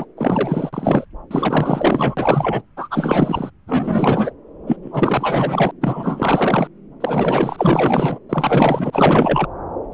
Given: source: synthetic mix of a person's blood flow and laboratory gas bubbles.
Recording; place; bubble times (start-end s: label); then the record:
Doppler ultrasound of blood flow; subclavian vein
0.00-0.05 s: bubbles
0.17-1.05 s: bubbles
1.30-2.62 s: bubbles
2.77-3.51 s: bubbles
3.67-4.33 s: bubbles
4.67-4.76 s: bubbles
4.83-5.71 s: bubbles
5.81-6.67 s: bubbles
7.00-8.19 s: bubbles
8.29-9.46 s: bubbles
9.91-9.94 s: bubbles
From the record:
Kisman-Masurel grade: 444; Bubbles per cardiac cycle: continuous sound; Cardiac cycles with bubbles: 100%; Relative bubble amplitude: maximal (0.775 to 0.999); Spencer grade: 4 (maximum detectable bubble signal sounding continuously throughout systole and diastole of every cardiac period, and overriding the amplitude of the normal cardiac signals); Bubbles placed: anywhere in the cardiac cycle